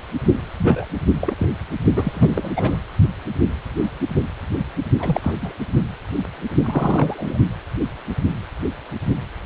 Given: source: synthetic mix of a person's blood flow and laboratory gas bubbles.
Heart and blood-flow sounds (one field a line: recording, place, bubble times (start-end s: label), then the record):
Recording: Doppler ultrasound of blood flow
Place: precordium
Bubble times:
0.58-0.86 s: bubbles
1.21-1.34 s: bubbles
1.38-1.46 s: bubbles
1.96-2.51 s: bubbles
2.56-2.77 s: bubbles
4.98-5.33 s: bubbles
5.41-5.54 s: bubbles
6.62-7.38 s: bubbles
From the record:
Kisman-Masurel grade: 232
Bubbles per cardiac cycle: several, 3 to 8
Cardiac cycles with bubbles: 50 to 99%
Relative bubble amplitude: moderate (0.250 to 0.450)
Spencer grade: 3 (all of the cardiac periods contain showers or single bubble signals, but not dominating or overriding the cardiac motion signals)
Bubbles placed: only in the low amplitude regions of the cardiac cycle